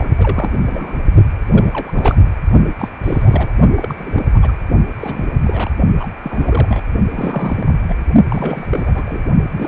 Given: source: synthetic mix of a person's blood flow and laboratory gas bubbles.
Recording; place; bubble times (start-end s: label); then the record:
Doppler ultrasound of blood flow; precordium
0.00-0.06 s: bubbles
0.18-0.55 s: bubbles
0.65-1.01 s: bubbles
1.53-2.16 s: bubbles
2.79-2.89 s: bubbles
3.02-3.52 s: bubbles
3.76-3.95 s: bubbles
3.97-4.22 s: bubbles
4.33-4.51 s: bubbles
5.00-5.32 s: bubbles
5.44-5.70 s: bubbles
6.00-6.08 s: bubbles
6.23-6.82 s: bubbles
7.10-8.03 s: bubbles
8.29-9.24 s: bubbles
9.52-9.67 s: bubbles
From the record:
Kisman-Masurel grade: 342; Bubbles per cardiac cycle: rolling drumbeat, 9 or more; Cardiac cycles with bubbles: 100%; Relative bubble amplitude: moderate (0.250 to 0.450); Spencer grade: 3 (all of the cardiac periods contain showers or single bubble signals, but not dominating or overriding the cardiac motion signals); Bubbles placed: only in the low amplitude regions of the cardiac cycle